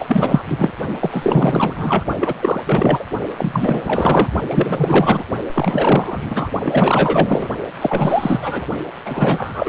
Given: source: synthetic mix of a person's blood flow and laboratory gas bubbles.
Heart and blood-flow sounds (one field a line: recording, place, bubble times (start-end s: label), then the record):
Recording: Doppler ultrasound of blood flow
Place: precordium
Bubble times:
0.00-0.42 s: bubbles
0.47-0.71 s: bubbles
1.01-2.04 s: bubbles
2.20-2.35 s: bubbles
2.40-2.60 s: bubbles
2.66-3.05 s: bubbles
3.38-4.28 s: bubbles
4.48-5.24 s: bubbles
5.54-6.51 s: bubbles
6.63-7.47 s: bubbles
7.81-8.65 s: bubbles
9.05-9.69 s: bubbles
From the record:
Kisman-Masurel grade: 444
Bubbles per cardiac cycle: continuous sound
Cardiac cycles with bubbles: 100%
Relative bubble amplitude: maximal (0.775 to 0.999)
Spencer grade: 4 (maximum detectable bubble signal sounding continuously throughout systole and diastole of every cardiac period, and overriding the amplitude of the normal cardiac signals)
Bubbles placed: only in the low amplitude regions of the cardiac cycle